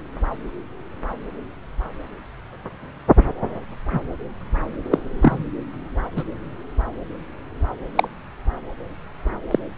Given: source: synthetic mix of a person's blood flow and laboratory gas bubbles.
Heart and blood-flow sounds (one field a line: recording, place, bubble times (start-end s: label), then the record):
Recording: Doppler ultrasound of blood flow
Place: subclavian vein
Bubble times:
3.91-4.01 s: bubbles
4.91-5.00 s: bubbles
5.21-5.44 s: bubbles
6.16-6.24 s: bubbles
7.96-8.08 s: bubbles
9.51-9.58 s: bubbles
From the record:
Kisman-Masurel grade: 123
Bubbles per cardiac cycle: 1 to 2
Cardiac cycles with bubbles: 10 to 50%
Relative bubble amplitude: loud (0.450 to 0.775)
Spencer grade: 2 (many but less than half of the cardiac periods contain bubble signals, singularly or in groups)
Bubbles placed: anywhere in the cardiac cycle